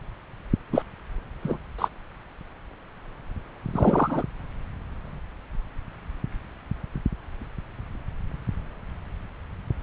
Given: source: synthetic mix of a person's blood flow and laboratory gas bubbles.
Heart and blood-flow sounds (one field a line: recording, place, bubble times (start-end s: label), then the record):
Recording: Doppler ultrasound of blood flow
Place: subclavian vein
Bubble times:
0.72-0.82 s: bubbles
1.43-1.57 s: bubbles
1.78-1.88 s: bubbles
3.75-4.24 s: bubbles
From the record:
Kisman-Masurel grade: 223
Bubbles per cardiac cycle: several, 3 to 8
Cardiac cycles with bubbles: 10 to 50%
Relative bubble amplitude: loud (0.450 to 0.775)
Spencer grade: 2 (many but less than half of the cardiac periods contain bubble signals, singularly or in groups)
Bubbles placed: anywhere in the cardiac cycle